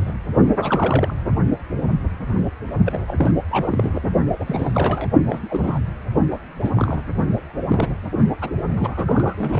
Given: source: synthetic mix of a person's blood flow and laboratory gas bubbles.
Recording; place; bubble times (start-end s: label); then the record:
Doppler ultrasound of blood flow; precordium
0.00-0.11 s: bubbles
0.56-1.14 s: bubbles
2.84-3.14 s: bubbles
3.17-3.31 s: bubbles
3.50-4.00 s: bubbles
4.39-5.08 s: bubbles
5.24-5.79 s: bubbles
6.61-7.04 s: bubbles
7.68-7.99 s: bubbles
8.41-8.51 s: bubbles
8.69-9.60 s: bubbles
From the record:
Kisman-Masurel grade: 232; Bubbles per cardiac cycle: several, 3 to 8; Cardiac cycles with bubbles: 50 to 99%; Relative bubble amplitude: moderate (0.250 to 0.450); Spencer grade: 3 (all of the cardiac periods contain showers or single bubble signals, but not dominating or overriding the cardiac motion signals); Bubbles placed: only in the low amplitude regions of the cardiac cycle